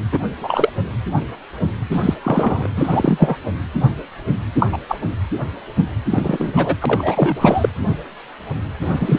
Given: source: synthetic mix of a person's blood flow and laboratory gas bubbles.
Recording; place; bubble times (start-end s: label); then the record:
Doppler ultrasound of blood flow; precordium
0.11-0.20 s: bubbles
0.41-0.69 s: bubbles
1.91-2.14 s: bubbles
2.24-2.67 s: bubbles
2.76-3.37 s: bubbles
4.58-4.67 s: bubbles
4.72-4.78 s: bubbles
4.88-4.98 s: bubbles
6.09-6.53 s: bubbles
6.55-6.76 s: bubbles
6.81-7.69 s: bubbles
8.80-9.19 s: bubbles
From the record:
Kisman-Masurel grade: 233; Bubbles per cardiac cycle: several, 3 to 8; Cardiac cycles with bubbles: 50 to 99%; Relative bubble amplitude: loud (0.450 to 0.775); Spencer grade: 3 (all of the cardiac periods contain showers or single bubble signals, but not dominating or overriding the cardiac motion signals); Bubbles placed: anywhere in the cardiac cycle